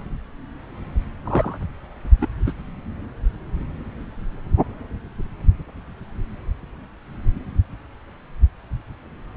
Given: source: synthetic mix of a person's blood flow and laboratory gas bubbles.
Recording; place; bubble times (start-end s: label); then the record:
Doppler ultrasound of blood flow; subclavian vein
1.25-1.58 s: bubbles
2.21-2.27 s: bubbles
2.46-2.52 s: bubbles
From the record:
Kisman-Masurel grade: 212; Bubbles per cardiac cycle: several, 3 to 8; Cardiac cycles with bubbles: 1 to 10%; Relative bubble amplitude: moderate (0.250 to 0.450); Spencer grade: 1 (occasional bubble signal discernible with the cardiac motion signal, with majority of cardiac periods free of bubbles); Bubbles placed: anywhere in the cardiac cycle